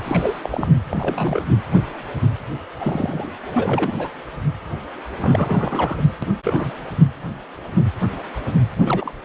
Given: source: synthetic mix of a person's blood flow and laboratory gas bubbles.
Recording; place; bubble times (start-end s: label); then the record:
Doppler ultrasound of blood flow; precordium
0.04-0.39 s: bubbles
0.43-0.68 s: bubbles
0.90-1.45 s: bubbles
2.80-3.32 s: bubbles
3.54-3.93 s: bubbles
3.98-4.08 s: bubbles
5.20-6.07 s: bubbles
6.22-6.33 s: bubbles
6.44-6.71 s: bubbles
8.80-9.13 s: bubbles
From the record:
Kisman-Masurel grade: 232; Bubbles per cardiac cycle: several, 3 to 8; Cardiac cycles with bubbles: 50 to 99%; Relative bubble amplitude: moderate (0.250 to 0.450); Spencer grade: 3 (all of the cardiac periods contain showers or single bubble signals, but not dominating or overriding the cardiac motion signals); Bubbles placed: anywhere in the cardiac cycle